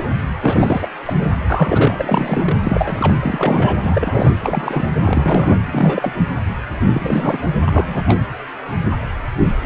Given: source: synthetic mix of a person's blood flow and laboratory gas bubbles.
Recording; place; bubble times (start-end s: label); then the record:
Doppler ultrasound of blood flow; precordium
0.00-0.04 s: bubbles
0.43-0.87 s: bubbles
1.05-1.31 s: bubbles
1.49-2.58 s: bubbles
2.63-3.16 s: bubbles
3.20-3.77 s: bubbles
3.81-4.32 s: bubbles
4.42-4.88 s: bubbles
5.04-5.60 s: bubbles
5.71-6.13 s: bubbles
6.94-7.41 s: bubbles
7.66-8.04 s: bubbles
8.06-8.18 s: bubbles
From the record:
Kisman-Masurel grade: 332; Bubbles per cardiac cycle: rolling drumbeat, 9 or more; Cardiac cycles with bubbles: 50 to 99%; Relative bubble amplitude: moderate (0.250 to 0.450); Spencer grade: 3 (all of the cardiac periods contain showers or single bubble signals, but not dominating or overriding the cardiac motion signals); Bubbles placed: anywhere in the cardiac cycle